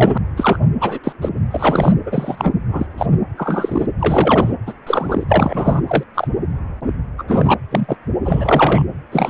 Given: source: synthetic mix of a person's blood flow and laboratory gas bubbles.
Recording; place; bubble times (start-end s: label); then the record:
Doppler ultrasound of blood flow; precordium
0.00-0.18 s: bubbles
0.36-0.58 s: bubbles
0.80-0.99 s: bubbles
1.03-1.12 s: bubbles
1.21-1.30 s: bubbles
1.50-1.92 s: bubbles
2.05-2.52 s: bubbles
2.68-2.86 s: bubbles
2.98-3.06 s: bubbles
3.37-3.86 s: bubbles
3.99-4.53 s: bubbles
4.66-4.73 s: bubbles
4.87-5.26 s: bubbles
5.28-5.81 s: bubbles
5.88-6.04 s: bubbles
6.14-6.28 s: bubbles
7.18-7.24 s: bubbles
7.28-7.54 s: bubbles
7.71-7.97 s: bubbles
8.23-8.83 s: bubbles
9.12-9.30 s: bubbles
From the record:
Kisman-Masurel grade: 243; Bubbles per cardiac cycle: several, 3 to 8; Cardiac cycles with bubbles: 100%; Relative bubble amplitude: loud (0.450 to 0.775); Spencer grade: 3 (all of the cardiac periods contain showers or single bubble signals, but not dominating or overriding the cardiac motion signals); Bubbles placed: anywhere in the cardiac cycle